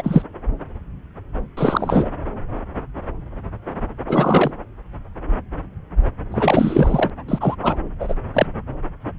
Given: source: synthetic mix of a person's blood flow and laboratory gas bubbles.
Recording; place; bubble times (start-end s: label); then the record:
Doppler ultrasound of blood flow; subclavian vein
0.00-0.24 s: bubbles
1.57-2.09 s: bubbles
4.08-4.52 s: bubbles
6.31-7.10 s: bubbles
7.28-7.56 s: bubbles
7.61-7.79 s: bubbles
8.00-8.14 s: bubbles
8.34-8.46 s: bubbles
From the record:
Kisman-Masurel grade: 233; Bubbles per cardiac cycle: several, 3 to 8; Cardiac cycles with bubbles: 50 to 99%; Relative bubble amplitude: loud (0.450 to 0.775); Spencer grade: 3 (all of the cardiac periods contain showers or single bubble signals, but not dominating or overriding the cardiac motion signals); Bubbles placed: anywhere in the cardiac cycle